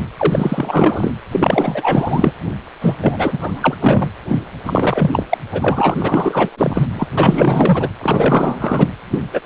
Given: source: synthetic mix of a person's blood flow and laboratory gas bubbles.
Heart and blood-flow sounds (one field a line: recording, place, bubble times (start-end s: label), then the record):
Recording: Doppler ultrasound of blood flow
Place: precordium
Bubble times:
0.00-0.04 s: bubbles
0.17-1.12 s: bubbles
1.31-2.33 s: bubbles
2.81-2.96 s: bubbles
3.01-3.77 s: bubbles
3.80-4.10 s: bubbles
4.28-4.42 s: bubbles
4.65-5.23 s: bubbles
5.29-5.38 s: bubbles
5.52-6.50 s: bubbles
6.57-6.85 s: bubbles
6.93-7.07 s: bubbles
7.17-7.89 s: bubbles
8.01-8.88 s: bubbles
9.11-9.23 s: bubbles
9.33-9.41 s: bubbles
From the record:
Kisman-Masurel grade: 444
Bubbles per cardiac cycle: continuous sound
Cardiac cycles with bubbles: 100%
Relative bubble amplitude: maximal (0.775 to 0.999)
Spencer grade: 4 (maximum detectable bubble signal sounding continuously throughout systole and diastole of every cardiac period, and overriding the amplitude of the normal cardiac signals)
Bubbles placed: anywhere in the cardiac cycle